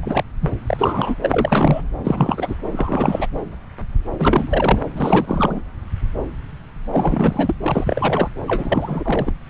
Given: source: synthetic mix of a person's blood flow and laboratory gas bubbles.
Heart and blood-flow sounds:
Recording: Doppler ultrasound of blood flow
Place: subclavian vein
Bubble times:
0.00-0.23 s: bubbles
0.41-0.50 s: bubbles
0.67-1.15 s: bubbles
1.22-1.85 s: bubbles
2.04-2.55 s: bubbles
2.71-3.27 s: bubbles
4.19-4.79 s: bubbles
4.94-5.61 s: bubbles
6.92-7.55 s: bubbles
7.63-8.28 s: bubbles
8.47-9.31 s: bubbles
From the record:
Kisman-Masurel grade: 332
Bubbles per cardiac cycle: rolling drumbeat, 9 or more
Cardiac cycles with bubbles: 50 to 99%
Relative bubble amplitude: moderate (0.250 to 0.450)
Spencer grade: 3 (all of the cardiac periods contain showers or single bubble signals, but not dominating or overriding the cardiac motion signals)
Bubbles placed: anywhere in the cardiac cycle

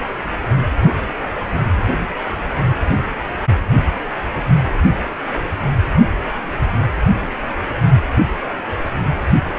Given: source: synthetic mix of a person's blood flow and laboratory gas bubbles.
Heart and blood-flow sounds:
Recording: Doppler ultrasound of blood flow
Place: precordium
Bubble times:
no bubbles
From the record:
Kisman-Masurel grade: 000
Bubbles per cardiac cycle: 0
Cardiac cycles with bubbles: 0%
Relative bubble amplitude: no bubbles discernible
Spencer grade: 0 (complete lack of bubble signals)

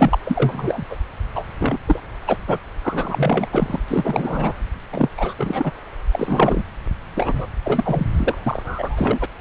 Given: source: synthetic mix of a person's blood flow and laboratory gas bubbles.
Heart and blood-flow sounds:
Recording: Doppler ultrasound of blood flow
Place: subclavian vein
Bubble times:
0.00-0.18 s: bubbles
0.26-0.84 s: bubbles
0.90-0.97 s: bubbles
1.34-1.44 s: bubbles
1.59-1.78 s: bubbles
1.86-2.02 s: bubbles
2.27-2.36 s: bubbles
2.47-2.58 s: bubbles
2.81-3.46 s: bubbles
3.51-3.79 s: bubbles
3.88-4.53 s: bubbles
4.92-5.09 s: bubbles
5.17-5.33 s: bubbles
5.38-5.72 s: bubbles
6.11-6.64 s: bubbles
7.16-7.47 s: bubbles
7.64-8.07 s: bubbles
8.16-8.38 s: bubbles
8.46-9.26 s: bubbles
From the record:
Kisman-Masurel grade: 343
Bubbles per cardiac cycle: rolling drumbeat, 9 or more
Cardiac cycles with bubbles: 100%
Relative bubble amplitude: loud (0.450 to 0.775)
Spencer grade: 3 (all of the cardiac periods contain showers or single bubble signals, but not dominating or overriding the cardiac motion signals)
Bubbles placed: anywhere in the cardiac cycle

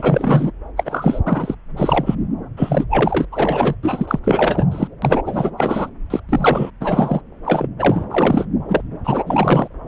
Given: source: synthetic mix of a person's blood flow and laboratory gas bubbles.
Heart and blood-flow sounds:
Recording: Doppler ultrasound of blood flow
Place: subclavian vein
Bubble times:
0.00-0.51 s: bubbles
0.77-1.20 s: bubbles
1.25-1.55 s: bubbles
1.76-2.15 s: bubbles
2.57-2.84 s: bubbles
2.89-3.25 s: bubbles
3.32-3.75 s: bubbles
3.83-4.20 s: bubbles
4.24-4.67 s: bubbles
4.71-4.88 s: bubbles
5.02-5.22 s: bubbles
5.25-5.50 s: bubbles
5.58-5.89 s: bubbles
6.10-6.20 s: bubbles
6.29-6.71 s: bubbles
6.80-7.21 s: bubbles
7.45-7.67 s: bubbles
7.79-8.06 s: bubbles
8.12-8.46 s: bubbles
8.69-8.83 s: bubbles
9.04-9.23 s: bubbles
9.26-9.68 s: bubbles
From the record:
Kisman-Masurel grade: 444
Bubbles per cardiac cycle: continuous sound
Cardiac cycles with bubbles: 100%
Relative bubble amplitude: maximal (0.775 to 0.999)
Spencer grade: 4 (maximum detectable bubble signal sounding continuously throughout systole and diastole of every cardiac period, and overriding the amplitude of the normal cardiac signals)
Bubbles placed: anywhere in the cardiac cycle

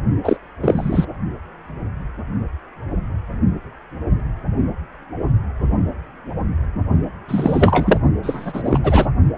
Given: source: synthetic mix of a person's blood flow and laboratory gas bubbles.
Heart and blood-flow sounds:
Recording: Doppler ultrasound of blood flow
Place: precordium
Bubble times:
0.23-0.36 s: bubbles
0.62-1.05 s: bubbles
7.28-8.00 s: bubbles
8.22-8.79 s: bubbles
8.83-9.06 s: bubbles
From the record:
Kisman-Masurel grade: 223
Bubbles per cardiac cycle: several, 3 to 8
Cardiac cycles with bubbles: 10 to 50%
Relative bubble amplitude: loud (0.450 to 0.775)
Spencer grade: 2 (many but less than half of the cardiac periods contain bubble signals, singularly or in groups)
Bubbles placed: only in the low amplitude regions of the cardiac cycle

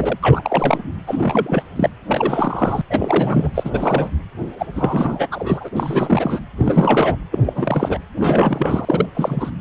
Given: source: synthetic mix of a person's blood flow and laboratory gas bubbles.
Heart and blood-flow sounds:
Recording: Doppler ultrasound of blood flow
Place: precordium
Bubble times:
0.00-0.18 s: bubbles
0.23-0.82 s: bubbles
1.07-1.63 s: bubbles
1.76-1.90 s: bubbles
2.07-2.81 s: bubbles
2.90-3.51 s: bubbles
3.54-4.10 s: bubbles
4.58-4.66 s: bubbles
4.75-5.28 s: bubbles
5.31-5.69 s: bubbles
5.76-6.40 s: bubbles
6.57-7.16 s: bubbles
7.31-8.00 s: bubbles
8.20-9.06 s: bubbles
9.14-9.51 s: bubbles
From the record:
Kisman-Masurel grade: 333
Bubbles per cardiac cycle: rolling drumbeat, 9 or more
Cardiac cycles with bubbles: 50 to 99%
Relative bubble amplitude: loud (0.450 to 0.775)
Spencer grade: 3 (all of the cardiac periods contain showers or single bubble signals, but not dominating or overriding the cardiac motion signals)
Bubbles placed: anywhere in the cardiac cycle

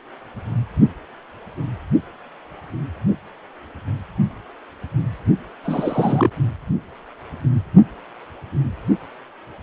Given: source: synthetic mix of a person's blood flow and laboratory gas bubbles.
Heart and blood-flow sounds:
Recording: Doppler ultrasound of blood flow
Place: precordium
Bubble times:
5.63-6.30 s: bubbles
From the record:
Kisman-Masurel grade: 212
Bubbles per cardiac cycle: several, 3 to 8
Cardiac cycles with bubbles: 1 to 10%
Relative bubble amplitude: moderate (0.250 to 0.450)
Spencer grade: 1 (occasional bubble signal discernible with the cardiac motion signal, with majority of cardiac periods free of bubbles)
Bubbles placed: only in the low amplitude regions of the cardiac cycle

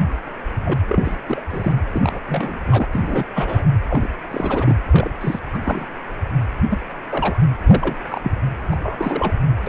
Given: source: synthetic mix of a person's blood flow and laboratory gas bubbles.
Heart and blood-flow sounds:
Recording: Doppler ultrasound of blood flow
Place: precordium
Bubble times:
0.65-0.73 s: bubbles
0.88-1.15 s: bubbles
1.27-1.40 s: bubbles
1.50-1.72 s: bubbles
1.92-2.19 s: bubbles
2.28-2.58 s: bubbles
2.67-2.87 s: bubbles
2.93-3.25 s: bubbles
3.35-3.65 s: bubbles
3.88-4.08 s: bubbles
4.30-4.76 s: bubbles
4.92-5.09 s: bubbles
5.21-5.39 s: bubbles
5.53-5.60 s: bubbles
5.63-5.85 s: bubbles
6.70-6.78 s: bubbles
7.09-7.37 s: bubbles
7.67-7.94 s: bubbles
8.10-8.20 s: bubbles
8.23-8.32 s: bubbles
8.71-8.77 s: bubbles
8.83-9.34 s: bubbles
9.62-9.69 s: bubbles
From the record:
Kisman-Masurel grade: 242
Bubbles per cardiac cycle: several, 3 to 8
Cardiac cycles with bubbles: 100%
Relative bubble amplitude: moderate (0.250 to 0.450)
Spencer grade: 3 (all of the cardiac periods contain showers or single bubble signals, but not dominating or overriding the cardiac motion signals)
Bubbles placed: anywhere in the cardiac cycle

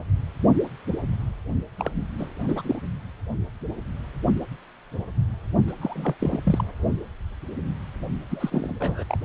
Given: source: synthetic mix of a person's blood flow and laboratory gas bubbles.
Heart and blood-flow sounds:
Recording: Doppler ultrasound of blood flow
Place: precordium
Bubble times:
1.78-1.92 s: bubbles
2.19-2.29 s: bubbles
2.43-2.79 s: bubbles
5.67-5.72 s: bubbles
5.81-6.15 s: bubbles
6.19-6.41 s: bubbles
6.45-6.64 s: bubbles
8.30-8.75 s: bubbles
8.80-9.17 s: bubbles
From the record:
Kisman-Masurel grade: 221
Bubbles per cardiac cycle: several, 3 to 8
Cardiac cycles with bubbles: 10 to 50%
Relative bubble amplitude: barely perceptible (0.100 to 0.250)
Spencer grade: 2 (many but less than half of the cardiac periods contain bubble signals, singularly or in groups)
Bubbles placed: only in the low amplitude regions of the cardiac cycle

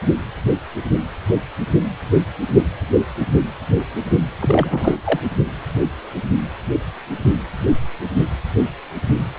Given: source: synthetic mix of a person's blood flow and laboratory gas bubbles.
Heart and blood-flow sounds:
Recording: Doppler ultrasound of blood flow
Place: precordium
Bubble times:
4.40-4.96 s: bubbles
5.04-5.20 s: bubbles
From the record:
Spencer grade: 1 (occasional bubble signal discernible with the cardiac motion signal, with majority of cardiac periods free of bubbles)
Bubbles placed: anywhere in the cardiac cycle

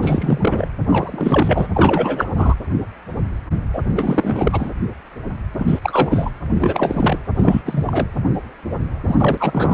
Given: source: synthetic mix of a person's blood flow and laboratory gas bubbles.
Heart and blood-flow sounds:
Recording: Doppler ultrasound of blood flow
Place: precordium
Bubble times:
0.01-0.68 s: bubbles
0.89-1.69 s: bubbles
1.73-2.31 s: bubbles
2.36-2.54 s: bubbles
3.73-3.83 s: bubbles
3.95-4.72 s: bubbles
5.58-5.79 s: bubbles
5.82-6.31 s: bubbles
6.55-7.19 s: bubbles
7.36-7.62 s: bubbles
7.65-8.07 s: bubbles
9.04-9.74 s: bubbles
From the record:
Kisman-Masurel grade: 333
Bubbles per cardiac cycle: rolling drumbeat, 9 or more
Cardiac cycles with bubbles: 50 to 99%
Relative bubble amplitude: loud (0.450 to 0.775)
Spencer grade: 3 (all of the cardiac periods contain showers or single bubble signals, but not dominating or overriding the cardiac motion signals)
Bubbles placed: anywhere in the cardiac cycle

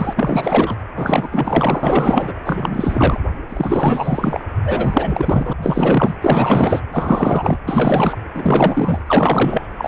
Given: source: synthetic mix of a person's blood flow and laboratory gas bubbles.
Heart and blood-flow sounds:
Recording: Doppler ultrasound of blood flow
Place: precordium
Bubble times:
0.00-0.13 s: bubbles
0.16-0.76 s: bubbles
0.95-2.33 s: bubbles
2.44-3.20 s: bubbles
3.49-4.45 s: bubbles
4.63-5.53 s: bubbles
5.62-6.15 s: bubbles
6.21-6.80 s: bubbles
6.92-7.58 s: bubbles
7.66-8.18 s: bubbles
8.34-9.03 s: bubbles
9.07-9.68 s: bubbles
9.78-9.88 s: bubbles
From the record:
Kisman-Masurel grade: 444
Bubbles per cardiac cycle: continuous sound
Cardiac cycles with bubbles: 100%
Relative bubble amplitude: maximal (0.775 to 0.999)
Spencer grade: 4 (maximum detectable bubble signal sounding continuously throughout systole and diastole of every cardiac period, and overriding the amplitude of the normal cardiac signals)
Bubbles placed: anywhere in the cardiac cycle

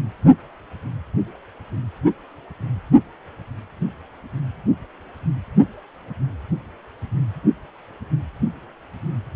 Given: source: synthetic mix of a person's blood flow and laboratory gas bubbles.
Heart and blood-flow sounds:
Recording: Doppler ultrasound of blood flow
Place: precordium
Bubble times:
no bubbles
From the record:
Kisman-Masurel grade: 000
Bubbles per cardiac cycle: 0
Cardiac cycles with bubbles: 0%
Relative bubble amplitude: no bubbles discernible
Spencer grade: 0 (complete lack of bubble signals)

